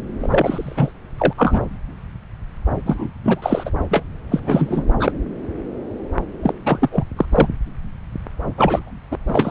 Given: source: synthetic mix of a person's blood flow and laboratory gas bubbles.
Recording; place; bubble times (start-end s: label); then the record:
Doppler ultrasound of blood flow; subclavian vein
0.20-0.91 s: bubbles
1.18-1.33 s: bubbles
1.37-1.60 s: bubbles
2.86-3.10 s: bubbles
3.24-3.71 s: bubbles
3.90-4.04 s: bubbles
4.31-4.40 s: bubbles
4.46-4.84 s: bubbles
5.00-5.12 s: bubbles
6.42-6.54 s: bubbles
6.66-7.04 s: bubbles
7.17-7.25 s: bubbles
7.29-7.47 s: bubbles
8.57-8.91 s: bubbles
9.11-9.18 s: bubbles
9.27-9.51 s: bubbles
From the record:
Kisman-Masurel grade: 333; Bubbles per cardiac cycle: rolling drumbeat, 9 or more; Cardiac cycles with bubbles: 50 to 99%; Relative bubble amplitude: loud (0.450 to 0.775); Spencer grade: 3 (all of the cardiac periods contain showers or single bubble signals, but not dominating or overriding the cardiac motion signals); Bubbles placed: anywhere in the cardiac cycle